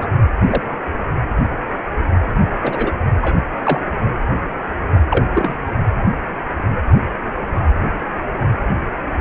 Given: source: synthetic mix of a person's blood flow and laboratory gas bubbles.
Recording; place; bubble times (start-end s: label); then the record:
Doppler ultrasound of blood flow; precordium
0.00-0.10 s: bubbles
0.45-0.63 s: bubbles
2.62-2.92 s: bubbles
3.21-3.42 s: bubbles
3.63-3.80 s: bubbles
5.10-5.25 s: bubbles
5.34-5.58 s: bubbles
From the record:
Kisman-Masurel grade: 122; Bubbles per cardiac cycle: 1 to 2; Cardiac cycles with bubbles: 10 to 50%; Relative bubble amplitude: moderate (0.250 to 0.450); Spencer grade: 2 (many but less than half of the cardiac periods contain bubble signals, singularly or in groups); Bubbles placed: anywhere in the cardiac cycle